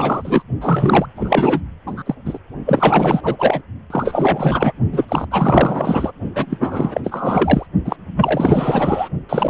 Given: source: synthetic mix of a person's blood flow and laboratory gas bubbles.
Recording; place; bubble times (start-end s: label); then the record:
Doppler ultrasound of blood flow; precordium
0.00-0.43 s: bubbles
0.61-1.06 s: bubbles
1.15-1.61 s: bubbles
1.86-2.03 s: bubbles
2.06-2.15 s: bubbles
2.25-2.39 s: bubbles
2.66-3.62 s: bubbles
3.90-4.72 s: bubbles
4.92-5.05 s: bubbles
5.08-5.26 s: bubbles
5.31-6.12 s: bubbles
6.34-7.01 s: bubbles
7.04-7.67 s: bubbles
7.85-7.97 s: bubbles
8.15-9.09 s: bubbles
9.29-9.50 s: bubbles
From the record:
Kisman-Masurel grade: 444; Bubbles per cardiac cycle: continuous sound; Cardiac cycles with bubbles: 100%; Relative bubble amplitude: maximal (0.775 to 0.999); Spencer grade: 4 (maximum detectable bubble signal sounding continuously throughout systole and diastole of every cardiac period, and overriding the amplitude of the normal cardiac signals); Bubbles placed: only in the low amplitude regions of the cardiac cycle